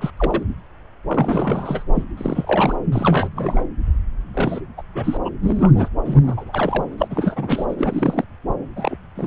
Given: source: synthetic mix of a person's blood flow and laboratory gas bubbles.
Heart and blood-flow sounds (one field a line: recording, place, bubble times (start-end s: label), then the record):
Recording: Doppler ultrasound of blood flow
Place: subclavian vein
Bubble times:
0.00-0.10 s: bubbles
0.16-0.43 s: bubbles
1.07-1.83 s: bubbles
1.95-2.04 s: bubbles
2.17-2.75 s: bubbles
2.92-3.67 s: bubbles
4.33-4.60 s: bubbles
4.77-4.82 s: bubbles
4.95-5.17 s: bubbles
5.25-5.30 s: bubbles
5.42-5.88 s: bubbles
6.04-6.83 s: bubbles
6.97-7.65 s: bubbles
7.69-7.74 s: bubbles
7.78-8.25 s: bubbles
8.76-8.96 s: bubbles
9.15-9.27 s: bubbles
From the record:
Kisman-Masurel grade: 332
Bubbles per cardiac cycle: rolling drumbeat, 9 or more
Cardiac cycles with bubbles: 50 to 99%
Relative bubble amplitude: moderate (0.250 to 0.450)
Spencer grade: 3 (all of the cardiac periods contain showers or single bubble signals, but not dominating or overriding the cardiac motion signals)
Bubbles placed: anywhere in the cardiac cycle